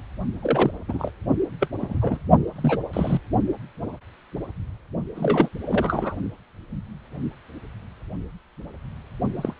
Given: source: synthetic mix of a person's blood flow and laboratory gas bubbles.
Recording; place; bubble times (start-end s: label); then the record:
Doppler ultrasound of blood flow; precordium
0.42-0.71 s: bubbles
0.88-1.11 s: bubbles
1.60-1.68 s: bubbles
1.80-2.19 s: bubbles
2.56-2.80 s: bubbles
2.93-3.21 s: bubbles
5.16-5.49 s: bubbles
5.65-6.16 s: bubbles
9.35-9.53 s: bubbles
From the record:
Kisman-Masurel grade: 232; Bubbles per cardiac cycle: several, 3 to 8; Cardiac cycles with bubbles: 50 to 99%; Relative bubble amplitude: moderate (0.250 to 0.450); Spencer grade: 3 (all of the cardiac periods contain showers or single bubble signals, but not dominating or overriding the cardiac motion signals); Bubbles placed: only in the low amplitude regions of the cardiac cycle